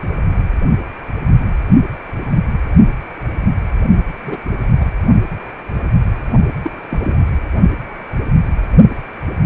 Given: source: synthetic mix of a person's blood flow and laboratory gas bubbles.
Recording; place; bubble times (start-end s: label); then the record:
Doppler ultrasound of blood flow; precordium
4.25-4.37 s: bubbles
4.80-4.85 s: bubbles
6.62-6.71 s: bubbles
6.90-7.22 s: bubbles
From the record:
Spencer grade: 2 (many but less than half of the cardiac periods contain bubble signals, singularly or in groups); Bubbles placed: only in the low amplitude regions of the cardiac cycle